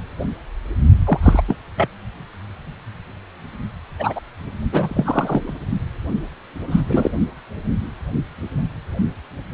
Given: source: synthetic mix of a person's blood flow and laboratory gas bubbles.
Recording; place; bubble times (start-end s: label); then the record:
Doppler ultrasound of blood flow; precordium
1.06-1.20 s: bubbles
1.22-1.42 s: bubbles
1.47-1.56 s: bubbles
1.76-1.89 s: bubbles
3.99-4.20 s: bubbles
4.72-5.53 s: bubbles
6.71-6.81 s: bubbles
6.87-7.11 s: bubbles
From the record:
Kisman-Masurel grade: 233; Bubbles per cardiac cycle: several, 3 to 8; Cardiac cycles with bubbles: 50 to 99%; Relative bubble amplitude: loud (0.450 to 0.775); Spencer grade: 3 (all of the cardiac periods contain showers or single bubble signals, but not dominating or overriding the cardiac motion signals); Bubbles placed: only in the low amplitude regions of the cardiac cycle